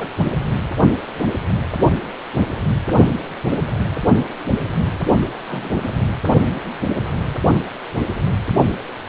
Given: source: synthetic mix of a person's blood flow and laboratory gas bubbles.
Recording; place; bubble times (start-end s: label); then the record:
Doppler ultrasound of blood flow; precordium
0.00-0.11 s: bubbles
3.51-3.56 s: bubbles
5.47-5.97 s: bubbles
From the record:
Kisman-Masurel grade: 121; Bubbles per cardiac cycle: 1 to 2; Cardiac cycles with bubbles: 10 to 50%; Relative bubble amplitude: barely perceptible (0.100 to 0.250); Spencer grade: 2 (many but less than half of the cardiac periods contain bubble signals, singularly or in groups); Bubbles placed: only in the low amplitude regions of the cardiac cycle